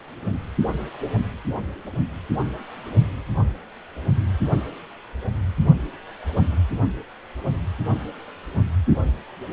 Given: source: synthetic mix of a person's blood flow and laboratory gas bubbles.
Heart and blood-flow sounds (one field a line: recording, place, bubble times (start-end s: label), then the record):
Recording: Doppler ultrasound of blood flow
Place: precordium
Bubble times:
no bubbles
From the record:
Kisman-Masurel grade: 000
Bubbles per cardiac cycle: 0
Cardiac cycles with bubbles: 0%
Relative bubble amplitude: no bubbles discernible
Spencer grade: 0 (complete lack of bubble signals)